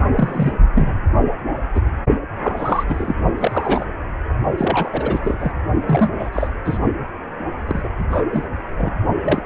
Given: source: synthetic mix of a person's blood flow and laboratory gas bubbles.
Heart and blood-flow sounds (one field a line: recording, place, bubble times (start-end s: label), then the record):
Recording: Doppler ultrasound of blood flow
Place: precordium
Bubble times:
0.15-0.52 s: bubbles
0.74-1.00 s: bubbles
1.74-1.81 s: bubbles
2.42-2.83 s: bubbles
2.88-3.16 s: bubbles
3.37-3.87 s: bubbles
4.57-5.51 s: bubbles
5.86-6.10 s: bubbles
6.19-6.30 s: bubbles
6.33-6.50 s: bubbles
6.65-6.78 s: bubbles
7.67-7.89 s: bubbles
8.11-8.25 s: bubbles
8.33-8.47 s: bubbles
8.78-8.91 s: bubbles
9.24-9.42 s: bubbles
From the record:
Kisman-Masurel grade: 242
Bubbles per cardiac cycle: several, 3 to 8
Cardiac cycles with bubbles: 100%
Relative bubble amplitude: moderate (0.250 to 0.450)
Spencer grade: 3 (all of the cardiac periods contain showers or single bubble signals, but not dominating or overriding the cardiac motion signals)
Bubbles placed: only in the low amplitude regions of the cardiac cycle